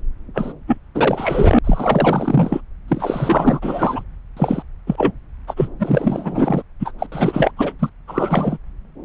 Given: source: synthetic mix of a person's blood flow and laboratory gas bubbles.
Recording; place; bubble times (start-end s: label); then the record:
Doppler ultrasound of blood flow; subclavian vein
0.34-0.53 s: bubbles
0.67-0.77 s: bubbles
0.95-1.59 s: bubbles
1.64-2.61 s: bubbles
2.88-4.04 s: bubbles
4.37-4.62 s: bubbles
4.87-5.12 s: bubbles
5.47-5.54 s: bubbles
5.56-5.69 s: bubbles
5.79-6.62 s: bubbles
6.79-6.92 s: bubbles
6.98-7.06 s: bubbles
7.12-7.51 s: bubbles
7.57-7.73 s: bubbles
7.79-7.90 s: bubbles
8.08-8.58 s: bubbles
From the record:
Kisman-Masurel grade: 444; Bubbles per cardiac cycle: continuous sound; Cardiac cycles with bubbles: 100%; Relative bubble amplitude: maximal (0.775 to 0.999); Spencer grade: 4 (maximum detectable bubble signal sounding continuously throughout systole and diastole of every cardiac period, and overriding the amplitude of the normal cardiac signals); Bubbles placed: anywhere in the cardiac cycle